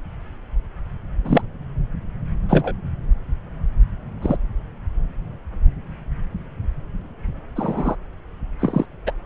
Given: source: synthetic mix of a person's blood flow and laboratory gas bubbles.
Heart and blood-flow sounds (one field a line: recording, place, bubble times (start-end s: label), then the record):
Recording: Doppler ultrasound of blood flow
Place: subclavian vein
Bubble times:
1.25-1.42 s: bubbles
2.48-2.74 s: bubbles
4.22-4.37 s: bubbles
7.55-7.96 s: bubbles
8.59-8.86 s: bubbles
9.06-9.12 s: bubbles
From the record:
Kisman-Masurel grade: 123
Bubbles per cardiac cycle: 1 to 2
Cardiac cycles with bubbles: 10 to 50%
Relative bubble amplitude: loud (0.450 to 0.775)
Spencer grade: 2 (many but less than half of the cardiac periods contain bubble signals, singularly or in groups)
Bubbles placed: anywhere in the cardiac cycle